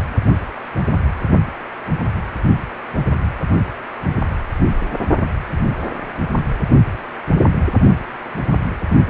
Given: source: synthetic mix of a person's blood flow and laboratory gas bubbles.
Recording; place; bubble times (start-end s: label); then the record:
Doppler ultrasound of blood flow; precordium
no bubbles
From the record:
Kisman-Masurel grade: 000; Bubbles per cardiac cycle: 0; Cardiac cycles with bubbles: 0%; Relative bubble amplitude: no bubbles discernible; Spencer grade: 0 (complete lack of bubble signals)